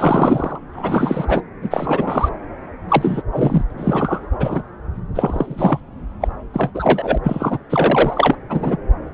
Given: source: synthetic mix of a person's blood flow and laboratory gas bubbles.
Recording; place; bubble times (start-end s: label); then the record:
Doppler ultrasound of blood flow; subclavian vein
0.00-0.59 s: bubbles
0.73-1.42 s: bubbles
1.61-2.29 s: bubbles
2.88-3.22 s: bubbles
3.31-3.64 s: bubbles
3.70-4.27 s: bubbles
4.39-4.62 s: bubbles
5.14-5.80 s: bubbles
6.21-6.28 s: bubbles
6.54-6.71 s: bubbles
6.74-7.18 s: bubbles
7.23-7.58 s: bubbles
7.70-8.37 s: bubbles
8.49-8.77 s: bubbles
From the record:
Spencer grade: 3 (all of the cardiac periods contain showers or single bubble signals, but not dominating or overriding the cardiac motion signals); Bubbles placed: anywhere in the cardiac cycle